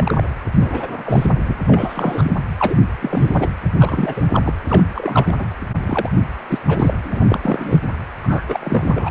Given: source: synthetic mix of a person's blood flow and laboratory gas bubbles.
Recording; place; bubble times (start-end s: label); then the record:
Doppler ultrasound of blood flow; precordium
0.00-0.24 s: bubbles
0.55-1.34 s: bubbles
1.44-1.55 s: bubbles
1.67-2.36 s: bubbles
2.58-2.75 s: bubbles
2.99-3.49 s: bubbles
3.79-4.25 s: bubbles
4.32-4.54 s: bubbles
4.68-4.83 s: bubbles
4.95-5.34 s: bubbles
5.38-5.46 s: bubbles
5.86-6.09 s: bubbles
6.48-6.58 s: bubbles
6.67-7.24 s: bubbles
7.30-7.79 s: bubbles
8.23-8.45 s: bubbles
8.48-9.10 s: bubbles
From the record:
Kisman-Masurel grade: 342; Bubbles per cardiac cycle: rolling drumbeat, 9 or more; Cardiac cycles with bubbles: 100%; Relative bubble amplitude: moderate (0.250 to 0.450); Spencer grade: 3 (all of the cardiac periods contain showers or single bubble signals, but not dominating or overriding the cardiac motion signals); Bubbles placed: anywhere in the cardiac cycle